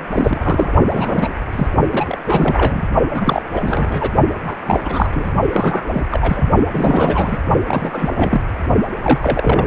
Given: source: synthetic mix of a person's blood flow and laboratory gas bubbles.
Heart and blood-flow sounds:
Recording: Doppler ultrasound of blood flow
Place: precordium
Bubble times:
0.13-0.74 s: bubbles
0.86-1.33 s: bubbles
1.52-1.67 s: bubbles
1.93-2.18 s: bubbles
2.26-2.81 s: bubbles
3.14-3.42 s: bubbles
3.53-4.12 s: bubbles
4.46-4.56 s: bubbles
4.66-5.32 s: bubbles
5.52-5.90 s: bubbles
5.92-6.04 s: bubbles
6.11-6.50 s: bubbles
6.73-7.38 s: bubbles
7.67-8.41 s: bubbles
9.02-9.67 s: bubbles
From the record:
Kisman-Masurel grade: 342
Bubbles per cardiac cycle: rolling drumbeat, 9 or more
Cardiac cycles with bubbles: 100%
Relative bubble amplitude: moderate (0.250 to 0.450)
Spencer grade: 3 (all of the cardiac periods contain showers or single bubble signals, but not dominating or overriding the cardiac motion signals)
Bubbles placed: only in the low amplitude regions of the cardiac cycle

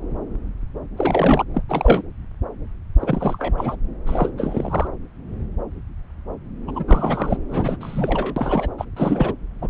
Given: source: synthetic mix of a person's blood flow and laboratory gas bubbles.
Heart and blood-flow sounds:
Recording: Doppler ultrasound of blood flow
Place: subclavian vein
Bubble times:
0.96-1.44 s: bubbles
1.54-1.62 s: bubbles
1.69-2.02 s: bubbles
3.00-3.76 s: bubbles
4.06-4.32 s: bubbles
4.38-4.88 s: bubbles
6.67-6.85 s: bubbles
6.88-7.38 s: bubbles
7.49-7.77 s: bubbles
7.80-8.68 s: bubbles
8.78-8.85 s: bubbles
8.96-9.34 s: bubbles
9.62-9.68 s: bubbles
From the record:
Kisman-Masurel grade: 332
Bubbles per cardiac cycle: rolling drumbeat, 9 or more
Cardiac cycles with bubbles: 50 to 99%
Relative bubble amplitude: moderate (0.250 to 0.450)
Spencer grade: 3 (all of the cardiac periods contain showers or single bubble signals, but not dominating or overriding the cardiac motion signals)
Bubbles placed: anywhere in the cardiac cycle

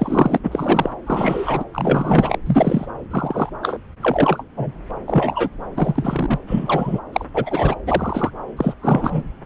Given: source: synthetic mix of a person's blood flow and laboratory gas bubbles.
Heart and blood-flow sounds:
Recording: Doppler ultrasound of blood flow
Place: subclavian vein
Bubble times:
0.00-0.39 s: bubbles
0.43-0.94 s: bubbles
1.06-1.64 s: bubbles
1.73-2.36 s: bubbles
2.46-2.86 s: bubbles
3.10-3.50 s: bubbles
3.62-3.77 s: bubbles
4.01-4.44 s: bubbles
4.57-4.72 s: bubbles
5.07-5.49 s: bubbles
5.75-6.40 s: bubbles
6.47-7.00 s: bubbles
7.12-7.25 s: bubbles
7.34-7.75 s: bubbles
7.86-8.31 s: bubbles
8.56-8.73 s: bubbles
8.81-9.23 s: bubbles
From the record:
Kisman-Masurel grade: 233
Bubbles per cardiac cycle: several, 3 to 8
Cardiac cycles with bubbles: 50 to 99%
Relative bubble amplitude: loud (0.450 to 0.775)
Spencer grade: 3 (all of the cardiac periods contain showers or single bubble signals, but not dominating or overriding the cardiac motion signals)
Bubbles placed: anywhere in the cardiac cycle

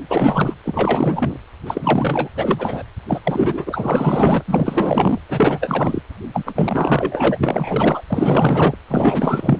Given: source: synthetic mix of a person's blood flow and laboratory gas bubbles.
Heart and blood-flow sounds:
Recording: Doppler ultrasound of blood flow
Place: precordium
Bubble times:
0.09-0.54 s: bubbles
0.64-1.38 s: bubbles
1.67-2.30 s: bubbles
2.34-2.83 s: bubbles
3.08-3.20 s: bubbles
3.24-4.42 s: bubbles
4.47-5.19 s: bubbles
5.29-6.01 s: bubbles
6.33-6.52 s: bubbles
6.55-7.38 s: bubbles
7.42-8.02 s: bubbles
8.07-8.77 s: bubbles
8.88-9.60 s: bubbles
From the record:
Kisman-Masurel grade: 444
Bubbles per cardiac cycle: continuous sound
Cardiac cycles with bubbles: 100%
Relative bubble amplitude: maximal (0.775 to 0.999)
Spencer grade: 4 (maximum detectable bubble signal sounding continuously throughout systole and diastole of every cardiac period, and overriding the amplitude of the normal cardiac signals)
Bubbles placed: anywhere in the cardiac cycle

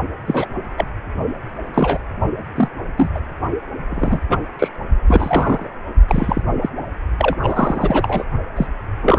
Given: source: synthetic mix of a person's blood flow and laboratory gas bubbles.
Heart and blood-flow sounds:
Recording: Doppler ultrasound of blood flow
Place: precordium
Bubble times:
0.26-0.47 s: bubbles
0.77-0.85 s: bubbles
1.74-2.00 s: bubbles
2.56-2.69 s: bubbles
2.97-3.10 s: bubbles
3.15-3.20 s: bubbles
3.90-4.21 s: bubbles
4.28-4.41 s: bubbles
4.58-4.69 s: bubbles
5.08-5.69 s: bubbles
6.08-6.42 s: bubbles
6.62-6.69 s: bubbles
7.18-7.37 s: bubbles
7.43-8.24 s: bubbles
8.55-8.67 s: bubbles
9.02-9.19 s: bubbles
From the record:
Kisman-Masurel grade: 243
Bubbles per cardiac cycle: several, 3 to 8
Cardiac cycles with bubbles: 100%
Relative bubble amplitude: loud (0.450 to 0.775)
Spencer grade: 3 (all of the cardiac periods contain showers or single bubble signals, but not dominating or overriding the cardiac motion signals)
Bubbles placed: only in the low amplitude regions of the cardiac cycle

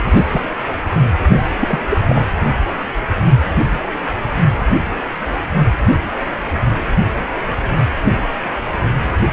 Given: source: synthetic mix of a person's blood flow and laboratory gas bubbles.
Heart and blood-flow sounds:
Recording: Doppler ultrasound of blood flow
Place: precordium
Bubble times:
0.05-0.45 s: bubbles
1.27-1.53 s: bubbles
1.59-1.79 s: bubbles
1.88-1.98 s: bubbles
2.08-2.31 s: bubbles
From the record:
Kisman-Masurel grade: 222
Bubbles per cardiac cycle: several, 3 to 8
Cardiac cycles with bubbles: 10 to 50%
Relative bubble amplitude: moderate (0.250 to 0.450)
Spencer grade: 2 (many but less than half of the cardiac periods contain bubble signals, singularly or in groups)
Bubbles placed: anywhere in the cardiac cycle

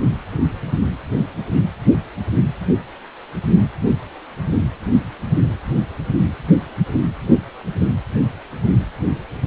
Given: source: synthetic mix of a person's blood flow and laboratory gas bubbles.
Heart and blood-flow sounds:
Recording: Doppler ultrasound of blood flow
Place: precordium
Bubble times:
no bubbles
From the record:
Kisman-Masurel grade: 000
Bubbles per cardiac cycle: 0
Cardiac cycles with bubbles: 0%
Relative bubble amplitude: no bubbles discernible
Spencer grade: 0 (complete lack of bubble signals)

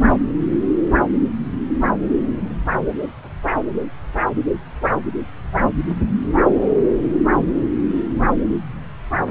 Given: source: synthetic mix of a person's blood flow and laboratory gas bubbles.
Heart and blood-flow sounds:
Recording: Doppler ultrasound of blood flow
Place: subclavian vein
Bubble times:
0.08-0.18 s: bubbles
0.24-0.38 s: bubbles
From the record:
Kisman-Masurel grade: 211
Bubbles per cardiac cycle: several, 3 to 8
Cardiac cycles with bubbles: 1 to 10%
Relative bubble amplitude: barely perceptible (0.100 to 0.250)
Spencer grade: 1 (occasional bubble signal discernible with the cardiac motion signal, with majority of cardiac periods free of bubbles)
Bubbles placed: anywhere in the cardiac cycle

